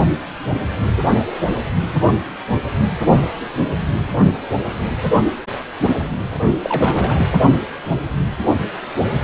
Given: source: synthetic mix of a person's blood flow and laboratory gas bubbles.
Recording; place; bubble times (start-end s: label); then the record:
Doppler ultrasound of blood flow; precordium
6.62-7.27 s: bubbles
From the record:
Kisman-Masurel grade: 212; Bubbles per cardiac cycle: several, 3 to 8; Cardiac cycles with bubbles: 1 to 10%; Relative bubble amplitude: moderate (0.250 to 0.450); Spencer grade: 1 (occasional bubble signal discernible with the cardiac motion signal, with majority of cardiac periods free of bubbles); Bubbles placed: only in the low amplitude regions of the cardiac cycle